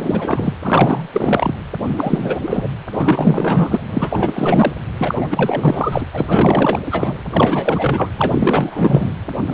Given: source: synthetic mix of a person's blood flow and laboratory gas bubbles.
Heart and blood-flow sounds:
Doppler ultrasound of blood flow; precordium
0.00-0.53 s: bubbles
0.61-1.08 s: bubbles
1.12-1.54 s: bubbles
1.97-2.38 s: bubbles
2.42-2.68 s: bubbles
2.94-3.80 s: bubbles
3.91-4.74 s: bubbles
4.98-6.05 s: bubbles
6.12-6.82 s: bubbles
6.91-7.13 s: bubbles
7.30-8.11 s: bubbles
8.16-9.12 s: bubbles
9.46-9.54 s: bubbles
From the record:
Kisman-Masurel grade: 444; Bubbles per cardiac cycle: continuous sound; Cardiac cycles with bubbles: 100%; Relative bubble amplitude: maximal (0.775 to 0.999); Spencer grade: 4 (maximum detectable bubble signal sounding continuously throughout systole and diastole of every cardiac period, and overriding the amplitude of the normal cardiac signals); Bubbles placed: anywhere in the cardiac cycle

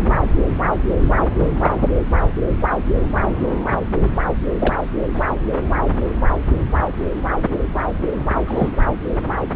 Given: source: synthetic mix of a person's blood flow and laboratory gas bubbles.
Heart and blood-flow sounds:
Doppler ultrasound of blood flow; subclavian vein
1.41-1.56 s: bubbles
1.60-1.74 s: bubbles
4.59-4.75 s: bubbles
5.13-5.22 s: bubbles
8.46-8.69 s: bubbles
From the record:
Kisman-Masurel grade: 122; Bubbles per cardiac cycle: 1 to 2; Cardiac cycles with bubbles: 10 to 50%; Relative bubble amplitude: moderate (0.250 to 0.450); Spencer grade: 2 (many but less than half of the cardiac periods contain bubble signals, singularly or in groups); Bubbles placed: anywhere in the cardiac cycle

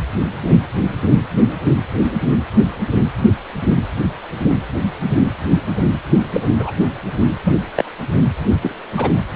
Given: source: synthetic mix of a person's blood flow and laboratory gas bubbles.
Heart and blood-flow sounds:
Doppler ultrasound of blood flow; precordium
6.33-6.41 s: bubbles
6.44-6.51 s: bubbles
6.59-6.71 s: bubbles
7.44-7.56 s: bubbles
7.75-7.84 s: bubbles
8.62-8.74 s: bubbles
8.96-9.11 s: bubbles
From the record:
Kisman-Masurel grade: 122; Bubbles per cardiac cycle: 1 to 2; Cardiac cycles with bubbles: 10 to 50%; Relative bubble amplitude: moderate (0.250 to 0.450); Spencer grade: 2 (many but less than half of the cardiac periods contain bubble signals, singularly or in groups); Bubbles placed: anywhere in the cardiac cycle

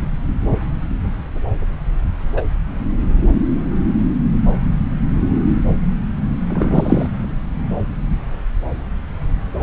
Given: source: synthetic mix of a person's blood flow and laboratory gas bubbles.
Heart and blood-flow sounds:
Doppler ultrasound of blood flow; subclavian vein
2.36-2.42 s: bubbles
6.50-7.08 s: bubbles
9.59-9.63 s: bubbles
From the record:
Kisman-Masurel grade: 123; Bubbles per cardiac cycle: 1 to 2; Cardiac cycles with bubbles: 10 to 50%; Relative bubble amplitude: loud (0.450 to 0.775); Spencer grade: 2 (many but less than half of the cardiac periods contain bubble signals, singularly or in groups); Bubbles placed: anywhere in the cardiac cycle

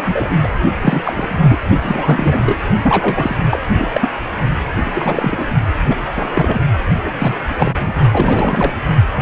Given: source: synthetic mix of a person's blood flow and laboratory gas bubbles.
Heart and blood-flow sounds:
Doppler ultrasound of blood flow; precordium
0.00-0.36 s: bubbles
0.43-0.47 s: bubbles
0.82-1.59 s: bubbles
1.81-2.60 s: bubbles
2.83-3.37 s: bubbles
3.50-3.60 s: bubbles
3.77-3.88 s: bubbles
3.92-4.10 s: bubbles
4.85-5.48 s: bubbles
5.83-5.97 s: bubbles
6.16-6.62 s: bubbles
7.03-7.37 s: bubbles
7.49-7.94 s: bubbles
8.12-8.73 s: bubbles
From the record:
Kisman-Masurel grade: 333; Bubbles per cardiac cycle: rolling drumbeat, 9 or more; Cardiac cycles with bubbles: 50 to 99%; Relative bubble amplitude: loud (0.450 to 0.775); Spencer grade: 3 (all of the cardiac periods contain showers or single bubble signals, but not dominating or overriding the cardiac motion signals); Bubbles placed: only in the low amplitude regions of the cardiac cycle

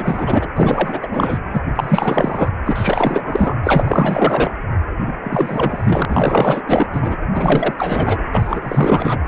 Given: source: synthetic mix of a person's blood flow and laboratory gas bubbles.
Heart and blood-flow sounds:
Doppler ultrasound of blood flow; precordium
0.00-0.47 s: bubbles
0.56-1.39 s: bubbles
1.53-1.61 s: bubbles
1.75-2.49 s: bubbles
2.65-3.55 s: bubbles
3.63-4.54 s: bubbles
4.99-5.20 s: bubbles
5.23-6.06 s: bubbles
6.09-6.62 s: bubbles
6.67-6.88 s: bubbles
6.93-7.16 s: bubbles
7.34-7.75 s: bubbles
7.78-8.19 s: bubbles
8.33-9.19 s: bubbles
From the record:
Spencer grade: 4 (maximum detectable bubble signal sounding continuously throughout systole and diastole of every cardiac period, and overriding the amplitude of the normal cardiac signals); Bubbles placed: anywhere in the cardiac cycle

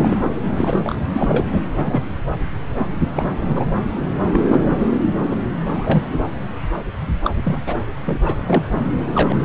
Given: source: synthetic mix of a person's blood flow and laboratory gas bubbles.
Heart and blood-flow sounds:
Doppler ultrasound of blood flow; subclavian vein
0.01-0.17 s: bubbles
0.21-0.35 s: bubbles
0.56-0.96 s: bubbles
1.11-1.45 s: bubbles
1.76-2.12 s: bubbles
2.78-2.86 s: bubbles
3.13-3.30 s: bubbles
3.49-3.64 s: bubbles
4.33-4.40 s: bubbles
4.47-4.62 s: bubbles
5.23-5.37 s: bubbles
5.71-6.07 s: bubbles
7.24-7.30 s: bubbles
7.45-7.61 s: bubbles
7.67-7.76 s: bubbles
8.05-8.20 s: bubbles
8.23-8.37 s: bubbles
8.46-8.72 s: bubbles
9.14-9.37 s: bubbles
From the record:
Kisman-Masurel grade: 232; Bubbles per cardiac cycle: several, 3 to 8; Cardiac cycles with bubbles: 50 to 99%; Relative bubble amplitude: moderate (0.250 to 0.450); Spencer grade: 3 (all of the cardiac periods contain showers or single bubble signals, but not dominating or overriding the cardiac motion signals); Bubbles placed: anywhere in the cardiac cycle

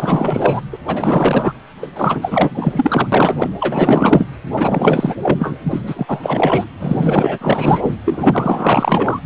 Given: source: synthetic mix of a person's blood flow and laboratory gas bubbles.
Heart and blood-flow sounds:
Doppler ultrasound of blood flow; precordium
0.00-0.62 s: bubbles
0.72-0.78 s: bubbles
0.87-1.53 s: bubbles
1.82-1.87 s: bubbles
1.95-3.07 s: bubbles
3.12-3.50 s: bubbles
3.61-4.26 s: bubbles
4.55-5.15 s: bubbles
5.22-5.58 s: bubbles
5.63-6.64 s: bubbles
6.79-7.38 s: bubbles
7.41-7.96 s: bubbles
8.05-9.20 s: bubbles
From the record:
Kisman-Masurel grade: 444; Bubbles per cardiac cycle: continuous sound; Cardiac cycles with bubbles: 100%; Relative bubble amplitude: maximal (0.775 to 0.999); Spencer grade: 4 (maximum detectable bubble signal sounding continuously throughout systole and diastole of every cardiac period, and overriding the amplitude of the normal cardiac signals); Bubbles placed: anywhere in the cardiac cycle

